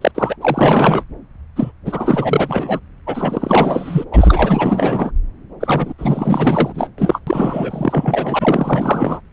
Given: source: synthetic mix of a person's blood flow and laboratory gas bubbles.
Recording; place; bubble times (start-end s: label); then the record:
Doppler ultrasound of blood flow; subclavian vein
0.01-0.11 s: bubbles
0.15-0.36 s: bubbles
0.41-1.03 s: bubbles
1.56-1.71 s: bubbles
1.85-2.80 s: bubbles
3.06-4.04 s: bubbles
4.11-5.11 s: bubbles
5.60-5.94 s: bubbles
5.98-6.89 s: bubbles
6.98-7.21 s: bubbles
7.27-9.21 s: bubbles
From the record:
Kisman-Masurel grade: 444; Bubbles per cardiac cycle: continuous sound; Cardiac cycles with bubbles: 100%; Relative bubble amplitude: maximal (0.775 to 0.999); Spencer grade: 4 (maximum detectable bubble signal sounding continuously throughout systole and diastole of every cardiac period, and overriding the amplitude of the normal cardiac signals); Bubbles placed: anywhere in the cardiac cycle